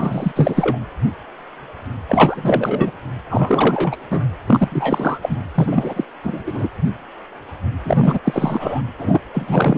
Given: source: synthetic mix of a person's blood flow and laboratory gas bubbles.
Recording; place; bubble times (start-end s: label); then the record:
Doppler ultrasound of blood flow; precordium
0.00-0.32 s: bubbles
0.35-0.78 s: bubbles
2.08-2.91 s: bubbles
3.30-3.97 s: bubbles
4.10-4.27 s: bubbles
4.46-4.68 s: bubbles
4.71-5.19 s: bubbles
5.22-5.37 s: bubbles
5.54-6.04 s: bubbles
6.24-6.43 s: bubbles
6.46-6.68 s: bubbles
7.84-8.19 s: bubbles
8.24-8.82 s: bubbles
8.98-9.21 s: bubbles
9.34-9.78 s: bubbles
From the record:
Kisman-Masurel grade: 333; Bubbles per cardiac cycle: rolling drumbeat, 9 or more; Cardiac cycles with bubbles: 50 to 99%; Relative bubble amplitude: loud (0.450 to 0.775); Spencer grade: 3 (all of the cardiac periods contain showers or single bubble signals, but not dominating or overriding the cardiac motion signals); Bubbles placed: anywhere in the cardiac cycle